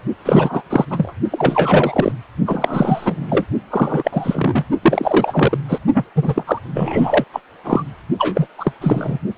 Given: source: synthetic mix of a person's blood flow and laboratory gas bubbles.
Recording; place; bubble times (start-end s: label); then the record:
Doppler ultrasound of blood flow; precordium
0.25-0.62 s: bubbles
0.70-0.85 s: bubbles
0.90-1.13 s: bubbles
1.31-2.12 s: bubbles
2.46-3.46 s: bubbles
3.70-4.65 s: bubbles
4.83-5.58 s: bubbles
5.68-5.79 s: bubbles
5.94-6.05 s: bubbles
6.15-6.43 s: bubbles
6.46-6.59 s: bubbles
6.74-7.24 s: bubbles
7.32-7.40 s: bubbles
7.64-7.83 s: bubbles
8.18-8.46 s: bubbles
8.57-8.72 s: bubbles
8.80-9.18 s: bubbles
From the record:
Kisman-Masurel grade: 343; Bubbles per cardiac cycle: rolling drumbeat, 9 or more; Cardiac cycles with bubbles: 100%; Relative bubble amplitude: loud (0.450 to 0.775); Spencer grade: 3 (all of the cardiac periods contain showers or single bubble signals, but not dominating or overriding the cardiac motion signals); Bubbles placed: only in the low amplitude regions of the cardiac cycle